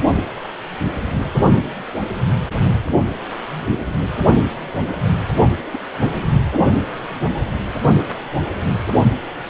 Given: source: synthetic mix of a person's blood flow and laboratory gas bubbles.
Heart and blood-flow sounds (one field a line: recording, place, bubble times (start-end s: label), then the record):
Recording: Doppler ultrasound of blood flow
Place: precordium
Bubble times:
5.72-5.79 s: bubbles
6.02-6.14 s: bubbles
From the record:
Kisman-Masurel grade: 121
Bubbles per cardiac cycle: 1 to 2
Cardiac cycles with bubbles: 10 to 50%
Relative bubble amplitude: barely perceptible (0.100 to 0.250)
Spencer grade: 2 (many but less than half of the cardiac periods contain bubble signals, singularly or in groups)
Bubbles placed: only in the low amplitude regions of the cardiac cycle